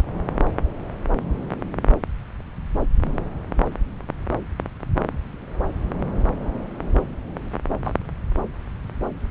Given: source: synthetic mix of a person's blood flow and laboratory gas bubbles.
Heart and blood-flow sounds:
Doppler ultrasound of blood flow; subclavian vein
7.84-7.94 s: bubbles
From the record:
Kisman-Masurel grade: 112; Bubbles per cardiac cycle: 1 to 2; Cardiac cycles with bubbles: 1 to 10%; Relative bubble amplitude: moderate (0.250 to 0.450); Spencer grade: 1 (occasional bubble signal discernible with the cardiac motion signal, with majority of cardiac periods free of bubbles); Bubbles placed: anywhere in the cardiac cycle

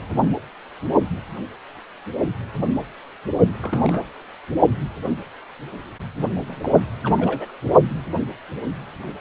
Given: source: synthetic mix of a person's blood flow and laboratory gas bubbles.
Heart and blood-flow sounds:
Doppler ultrasound of blood flow; precordium
0.18-0.32 s: bubbles
3.62-4.04 s: bubbles
6.46-6.83 s: bubbles
7.04-7.52 s: bubbles
From the record:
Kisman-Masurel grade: 121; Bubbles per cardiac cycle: 1 to 2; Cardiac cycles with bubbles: 10 to 50%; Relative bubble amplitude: barely perceptible (0.100 to 0.250); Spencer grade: 2 (many but less than half of the cardiac periods contain bubble signals, singularly or in groups); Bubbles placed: only in the low amplitude regions of the cardiac cycle

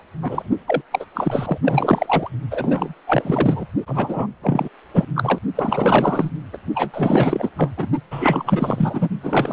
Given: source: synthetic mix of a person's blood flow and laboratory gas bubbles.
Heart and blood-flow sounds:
Doppler ultrasound of blood flow; precordium
0.21-0.51 s: bubbles
0.67-0.82 s: bubbles
0.91-1.05 s: bubbles
1.14-1.58 s: bubbles
1.64-2.29 s: bubbles
2.50-2.94 s: bubbles
3.07-3.67 s: bubbles
3.87-4.27 s: bubbles
4.42-4.68 s: bubbles
4.93-5.06 s: bubbles
5.15-5.39 s: bubbles
5.55-6.30 s: bubbles
6.52-6.58 s: bubbles
6.75-7.50 s: bubbles
7.57-7.71 s: bubbles
7.77-7.89 s: bubbles
8.11-9.09 s: bubbles
9.22-9.53 s: bubbles
From the record:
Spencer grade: 4 (maximum detectable bubble signal sounding continuously throughout systole and diastole of every cardiac period, and overriding the amplitude of the normal cardiac signals); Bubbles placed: only in the low amplitude regions of the cardiac cycle

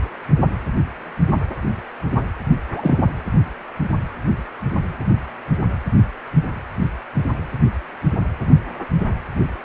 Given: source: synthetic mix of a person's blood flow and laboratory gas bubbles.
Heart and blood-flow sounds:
Doppler ultrasound of blood flow; precordium
2.76-3.05 s: bubbles
From the record:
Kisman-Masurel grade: 112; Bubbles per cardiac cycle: 1 to 2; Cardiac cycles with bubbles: 1 to 10%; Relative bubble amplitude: moderate (0.250 to 0.450); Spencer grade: 1 (occasional bubble signal discernible with the cardiac motion signal, with majority of cardiac periods free of bubbles); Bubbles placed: anywhere in the cardiac cycle

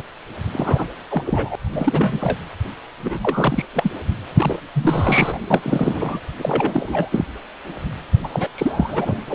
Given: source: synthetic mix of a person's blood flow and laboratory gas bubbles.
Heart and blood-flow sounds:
Doppler ultrasound of blood flow; precordium
0.00-0.03 s: bubbles
0.52-0.85 s: bubbles
1.09-1.24 s: bubbles
1.26-1.56 s: bubbles
1.73-2.38 s: bubbles
3.02-3.65 s: bubbles
3.73-3.91 s: bubbles
4.36-4.56 s: bubbles
4.74-5.38 s: bubbles
5.50-6.19 s: bubbles
6.38-7.26 s: bubbles
8.23-8.28 s: bubbles
8.32-8.48 s: bubbles
8.54-9.21 s: bubbles
9.28-9.35 s: bubbles
From the record:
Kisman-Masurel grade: 342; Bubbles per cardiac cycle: rolling drumbeat, 9 or more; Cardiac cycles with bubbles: 100%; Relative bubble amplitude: moderate (0.250 to 0.450); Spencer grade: 3 (all of the cardiac periods contain showers or single bubble signals, but not dominating or overriding the cardiac motion signals); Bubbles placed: anywhere in the cardiac cycle

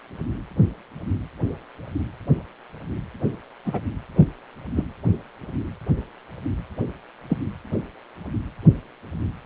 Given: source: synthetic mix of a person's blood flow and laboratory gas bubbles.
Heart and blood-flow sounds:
Doppler ultrasound of blood flow; precordium
3.65-3.80 s: bubbles
4.18-4.28 s: bubbles
4.76-4.85 s: bubbles
7.29-7.38 s: bubbles
From the record:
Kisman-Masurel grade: 122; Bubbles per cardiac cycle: 1 to 2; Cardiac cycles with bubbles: 10 to 50%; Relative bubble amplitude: moderate (0.250 to 0.450); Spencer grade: 2 (many but less than half of the cardiac periods contain bubble signals, singularly or in groups); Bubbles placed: anywhere in the cardiac cycle

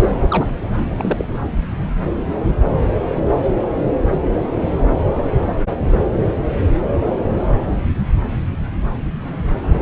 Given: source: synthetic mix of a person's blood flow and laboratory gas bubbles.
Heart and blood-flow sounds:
Doppler ultrasound of blood flow; subclavian vein
0.00-0.15 s: bubbles
0.22-0.47 s: bubbles
0.97-1.25 s: bubbles
1.27-1.38 s: bubbles
From the record:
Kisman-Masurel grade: 222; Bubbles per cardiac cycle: several, 3 to 8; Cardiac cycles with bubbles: 10 to 50%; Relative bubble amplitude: moderate (0.250 to 0.450); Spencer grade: 2 (many but less than half of the cardiac periods contain bubble signals, singularly or in groups); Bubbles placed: anywhere in the cardiac cycle

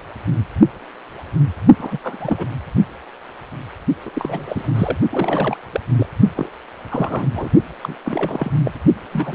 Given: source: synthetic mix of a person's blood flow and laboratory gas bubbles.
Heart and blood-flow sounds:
Doppler ultrasound of blood flow; precordium
1.78-1.98 s: bubbles
2.04-2.47 s: bubbles
4.05-4.10 s: bubbles
4.14-4.97 s: bubbles
5.11-5.57 s: bubbles
5.72-5.80 s: bubbles
5.94-6.09 s: bubbles
6.34-6.49 s: bubbles
6.89-7.50 s: bubbles
7.82-7.96 s: bubbles
8.06-8.52 s: bubbles
8.65-8.71 s: bubbles
9.12-9.35 s: bubbles
From the record:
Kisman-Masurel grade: 332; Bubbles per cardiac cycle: rolling drumbeat, 9 or more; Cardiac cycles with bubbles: 50 to 99%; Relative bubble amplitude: moderate (0.250 to 0.450); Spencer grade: 3 (all of the cardiac periods contain showers or single bubble signals, but not dominating or overriding the cardiac motion signals); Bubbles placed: only in the low amplitude regions of the cardiac cycle

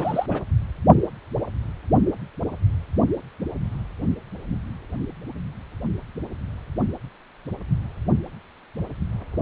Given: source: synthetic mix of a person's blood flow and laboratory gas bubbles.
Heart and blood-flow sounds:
Doppler ultrasound of blood flow; precordium
0.00-0.26 s: bubbles
0.29-0.42 s: bubbles
From the record:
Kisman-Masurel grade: 211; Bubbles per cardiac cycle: several, 3 to 8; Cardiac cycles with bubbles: 1 to 10%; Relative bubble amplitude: barely perceptible (0.100 to 0.250); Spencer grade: 1 (occasional bubble signal discernible with the cardiac motion signal, with majority of cardiac periods free of bubbles); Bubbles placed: anywhere in the cardiac cycle

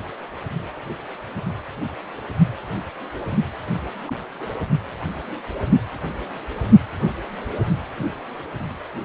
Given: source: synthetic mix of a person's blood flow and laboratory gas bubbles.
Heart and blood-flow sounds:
Doppler ultrasound of blood flow; precordium
4.06-4.13 s: bubbles
4.38-4.47 s: bubbles
From the record:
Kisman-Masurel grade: 111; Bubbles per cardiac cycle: 1 to 2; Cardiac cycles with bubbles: 1 to 10%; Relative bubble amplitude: barely perceptible (0.100 to 0.250); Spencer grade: 1 (occasional bubble signal discernible with the cardiac motion signal, with majority of cardiac periods free of bubbles); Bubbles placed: only in the low amplitude regions of the cardiac cycle

